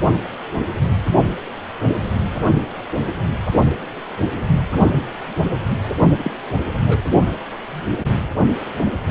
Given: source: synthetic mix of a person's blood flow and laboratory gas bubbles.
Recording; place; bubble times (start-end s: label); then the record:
Doppler ultrasound of blood flow; precordium
6.18-6.31 s: bubbles
6.87-7.00 s: bubbles
From the record:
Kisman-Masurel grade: 112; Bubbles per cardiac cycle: 1 to 2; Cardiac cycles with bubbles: 1 to 10%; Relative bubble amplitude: moderate (0.250 to 0.450); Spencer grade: 1 (occasional bubble signal discernible with the cardiac motion signal, with majority of cardiac periods free of bubbles); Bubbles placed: only in the low amplitude regions of the cardiac cycle